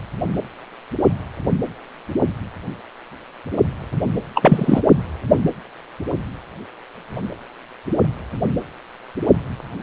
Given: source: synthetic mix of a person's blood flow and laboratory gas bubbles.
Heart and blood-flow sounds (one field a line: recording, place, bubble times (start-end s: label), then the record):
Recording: Doppler ultrasound of blood flow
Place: precordium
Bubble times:
4.34-4.81 s: bubbles
From the record:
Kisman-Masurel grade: 213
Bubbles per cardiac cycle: several, 3 to 8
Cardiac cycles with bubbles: 1 to 10%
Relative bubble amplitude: loud (0.450 to 0.775)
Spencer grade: 1 (occasional bubble signal discernible with the cardiac motion signal, with majority of cardiac periods free of bubbles)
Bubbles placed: anywhere in the cardiac cycle